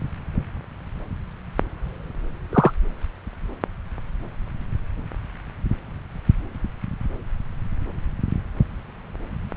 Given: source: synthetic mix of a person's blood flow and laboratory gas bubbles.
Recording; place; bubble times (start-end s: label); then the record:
Doppler ultrasound of blood flow; subclavian vein
2.53-2.71 s: bubbles
From the record:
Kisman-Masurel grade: 113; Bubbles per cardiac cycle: 1 to 2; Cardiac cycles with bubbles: 1 to 10%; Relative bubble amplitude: loud (0.450 to 0.775); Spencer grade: 1 (occasional bubble signal discernible with the cardiac motion signal, with majority of cardiac periods free of bubbles); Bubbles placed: anywhere in the cardiac cycle